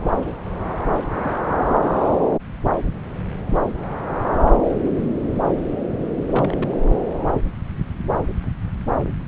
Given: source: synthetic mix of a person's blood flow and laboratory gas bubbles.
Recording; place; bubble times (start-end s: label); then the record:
Doppler ultrasound of blood flow; subclavian vein
1.23-1.31 s: bubbles
1.34-1.40 s: bubbles
4.84-4.90 s: bubbles
6.28-6.77 s: bubbles
From the record:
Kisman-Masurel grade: 121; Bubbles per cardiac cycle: 1 to 2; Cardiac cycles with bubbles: 10 to 50%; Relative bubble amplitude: barely perceptible (0.100 to 0.250); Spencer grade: 2 (many but less than half of the cardiac periods contain bubble signals, singularly or in groups); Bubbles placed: anywhere in the cardiac cycle